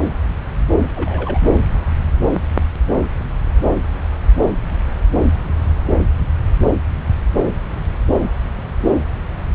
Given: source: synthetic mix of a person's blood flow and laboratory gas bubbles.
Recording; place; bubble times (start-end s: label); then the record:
Doppler ultrasound of blood flow; subclavian vein
0.95-1.40 s: bubbles
From the record:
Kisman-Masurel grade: 111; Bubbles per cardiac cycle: 1 to 2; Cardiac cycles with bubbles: 1 to 10%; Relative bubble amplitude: barely perceptible (0.100 to 0.250); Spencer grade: 1 (occasional bubble signal discernible with the cardiac motion signal, with majority of cardiac periods free of bubbles); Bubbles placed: anywhere in the cardiac cycle